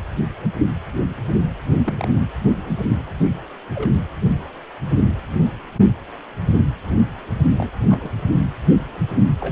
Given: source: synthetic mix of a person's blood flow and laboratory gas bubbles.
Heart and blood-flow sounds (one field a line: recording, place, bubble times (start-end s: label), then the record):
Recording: Doppler ultrasound of blood flow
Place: precordium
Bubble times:
1.84-2.08 s: bubbles
3.75-3.94 s: bubbles
7.57-7.70 s: bubbles
7.89-8.11 s: bubbles
9.40-9.51 s: bubbles
From the record:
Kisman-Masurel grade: 121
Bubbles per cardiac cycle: 1 to 2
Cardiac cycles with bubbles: 10 to 50%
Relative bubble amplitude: barely perceptible (0.100 to 0.250)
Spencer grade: 2 (many but less than half of the cardiac periods contain bubble signals, singularly or in groups)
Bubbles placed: anywhere in the cardiac cycle